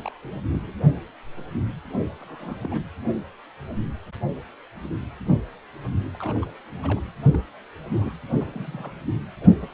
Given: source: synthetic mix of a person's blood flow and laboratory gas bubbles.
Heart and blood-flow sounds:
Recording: Doppler ultrasound of blood flow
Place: precordium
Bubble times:
0.04-0.09 s: bubbles
0.22-0.42 s: bubbles
0.52-0.76 s: bubbles
2.20-2.81 s: bubbles
6.13-6.17 s: bubbles
6.19-6.50 s: bubbles
6.82-7.00 s: bubbles
7.32-7.38 s: bubbles
7.85-8.12 s: bubbles
8.28-8.98 s: bubbles
9.41-9.50 s: bubbles
9.62-9.68 s: bubbles
From the record:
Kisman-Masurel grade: 221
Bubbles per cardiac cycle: several, 3 to 8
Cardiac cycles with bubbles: 10 to 50%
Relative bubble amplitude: barely perceptible (0.100 to 0.250)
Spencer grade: 2 (many but less than half of the cardiac periods contain bubble signals, singularly or in groups)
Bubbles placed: anywhere in the cardiac cycle

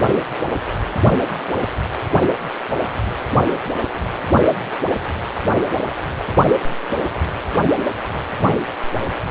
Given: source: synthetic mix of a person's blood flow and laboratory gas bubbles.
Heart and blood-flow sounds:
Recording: Doppler ultrasound of blood flow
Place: precordium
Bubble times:
6.17-6.25 s: bubbles
From the record:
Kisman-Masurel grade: 121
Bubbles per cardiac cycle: 1 to 2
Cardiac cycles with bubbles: 10 to 50%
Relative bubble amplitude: barely perceptible (0.100 to 0.250)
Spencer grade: 2 (many but less than half of the cardiac periods contain bubble signals, singularly or in groups)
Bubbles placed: anywhere in the cardiac cycle

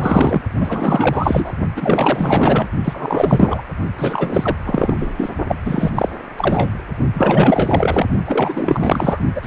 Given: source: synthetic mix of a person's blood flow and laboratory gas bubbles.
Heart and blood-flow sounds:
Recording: Doppler ultrasound of blood flow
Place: precordium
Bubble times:
0.00-0.42 s: bubbles
0.60-1.52 s: bubbles
1.76-2.68 s: bubbles
2.84-3.64 s: bubbles
3.98-4.55 s: bubbles
4.65-5.12 s: bubbles
5.16-5.29 s: bubbles
5.47-5.55 s: bubbles
5.64-5.91 s: bubbles
5.94-6.09 s: bubbles
6.37-6.71 s: bubbles
7.13-8.06 s: bubbles
8.26-9.20 s: bubbles
9.35-9.46 s: bubbles
From the record:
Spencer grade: 4 (maximum detectable bubble signal sounding continuously throughout systole and diastole of every cardiac period, and overriding the amplitude of the normal cardiac signals)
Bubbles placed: only in the low amplitude regions of the cardiac cycle

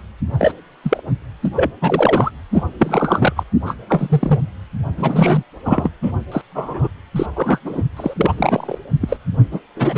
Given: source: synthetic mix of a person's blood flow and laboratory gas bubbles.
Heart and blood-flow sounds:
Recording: Doppler ultrasound of blood flow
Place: precordium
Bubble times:
0.39-0.52 s: bubbles
0.83-1.01 s: bubbles
1.45-1.49 s: bubbles
1.55-1.71 s: bubbles
1.81-2.31 s: bubbles
2.52-2.63 s: bubbles
2.79-3.33 s: bubbles
3.36-3.44 s: bubbles
3.65-3.75 s: bubbles
3.88-4.39 s: bubbles
4.98-5.44 s: bubbles
5.65-5.91 s: bubbles
6.03-6.12 s: bubbles
6.32-6.42 s: bubbles
6.55-6.88 s: bubbles
7.16-7.26 s: bubbles
7.36-7.59 s: bubbles
7.65-7.82 s: bubbles
7.97-8.14 s: bubbles
8.17-8.79 s: bubbles
9.01-9.17 s: bubbles
9.51-9.60 s: bubbles
9.76-9.98 s: bubbles
From the record:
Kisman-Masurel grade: 233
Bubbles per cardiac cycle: several, 3 to 8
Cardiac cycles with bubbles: 50 to 99%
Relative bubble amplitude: loud (0.450 to 0.775)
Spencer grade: 3 (all of the cardiac periods contain showers or single bubble signals, but not dominating or overriding the cardiac motion signals)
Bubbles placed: anywhere in the cardiac cycle

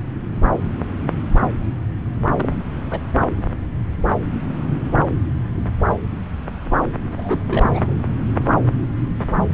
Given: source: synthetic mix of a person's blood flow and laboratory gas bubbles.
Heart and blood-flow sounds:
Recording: Doppler ultrasound of blood flow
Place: subclavian vein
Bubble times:
2.35-2.56 s: bubbles
2.91-3.01 s: bubbles
7.17-7.70 s: bubbles
7.73-7.93 s: bubbles
From the record:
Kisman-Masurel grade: 211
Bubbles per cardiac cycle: several, 3 to 8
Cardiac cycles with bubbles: 1 to 10%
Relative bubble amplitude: barely perceptible (0.100 to 0.250)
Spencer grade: 1 (occasional bubble signal discernible with the cardiac motion signal, with majority of cardiac periods free of bubbles)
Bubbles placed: anywhere in the cardiac cycle

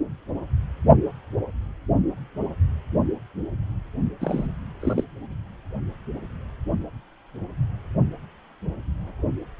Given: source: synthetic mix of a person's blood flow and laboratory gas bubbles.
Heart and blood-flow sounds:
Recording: Doppler ultrasound of blood flow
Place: precordium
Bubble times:
4.21-4.47 s: bubbles
4.80-5.04 s: bubbles
From the record:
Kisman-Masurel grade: 212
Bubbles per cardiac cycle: several, 3 to 8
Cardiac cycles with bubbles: 1 to 10%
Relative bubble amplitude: moderate (0.250 to 0.450)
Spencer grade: 1 (occasional bubble signal discernible with the cardiac motion signal, with majority of cardiac periods free of bubbles)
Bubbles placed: only in the low amplitude regions of the cardiac cycle

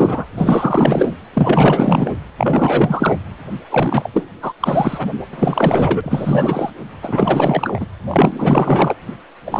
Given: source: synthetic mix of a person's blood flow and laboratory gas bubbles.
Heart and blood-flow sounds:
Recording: Doppler ultrasound of blood flow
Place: precordium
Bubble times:
0.00-0.26 s: bubbles
0.38-1.15 s: bubbles
1.33-2.11 s: bubbles
2.38-3.17 s: bubbles
3.69-4.09 s: bubbles
4.13-4.29 s: bubbles
4.42-4.53 s: bubbles
4.60-5.08 s: bubbles
5.33-6.01 s: bubbles
6.04-6.70 s: bubbles
7.02-7.87 s: bubbles
8.07-8.96 s: bubbles
9.46-9.60 s: bubbles
From the record:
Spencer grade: 4 (maximum detectable bubble signal sounding continuously throughout systole and diastole of every cardiac period, and overriding the amplitude of the normal cardiac signals)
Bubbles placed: anywhere in the cardiac cycle

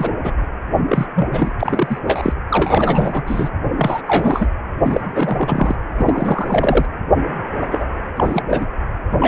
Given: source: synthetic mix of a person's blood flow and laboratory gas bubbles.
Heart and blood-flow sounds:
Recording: Doppler ultrasound of blood flow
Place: precordium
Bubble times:
0.00-0.13 s: bubbles
0.17-0.33 s: bubbles
0.89-1.06 s: bubbles
1.15-1.28 s: bubbles
1.31-1.52 s: bubbles
1.59-1.98 s: bubbles
2.04-2.33 s: bubbles
2.49-3.23 s: bubbles
3.27-3.50 s: bubbles
3.77-4.02 s: bubbles
4.07-4.48 s: bubbles
4.83-5.76 s: bubbles
5.98-6.86 s: bubbles
7.61-7.85 s: bubbles
8.16-8.42 s: bubbles
8.49-8.67 s: bubbles
9.20-9.28 s: bubbles
From the record:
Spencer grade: 3 (all of the cardiac periods contain showers or single bubble signals, but not dominating or overriding the cardiac motion signals)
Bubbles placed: anywhere in the cardiac cycle

